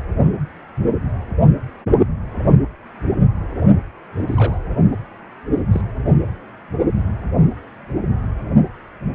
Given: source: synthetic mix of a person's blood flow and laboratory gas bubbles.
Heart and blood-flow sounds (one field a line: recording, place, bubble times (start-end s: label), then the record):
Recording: Doppler ultrasound of blood flow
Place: precordium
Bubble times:
4.17-4.25 s: bubbles
4.27-4.58 s: bubbles
4.89-4.96 s: bubbles
5.56-5.62 s: bubbles
5.71-5.82 s: bubbles
From the record:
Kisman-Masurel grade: 221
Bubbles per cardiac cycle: several, 3 to 8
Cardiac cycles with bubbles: 10 to 50%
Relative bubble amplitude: barely perceptible (0.100 to 0.250)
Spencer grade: 2 (many but less than half of the cardiac periods contain bubble signals, singularly or in groups)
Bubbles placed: only in the low amplitude regions of the cardiac cycle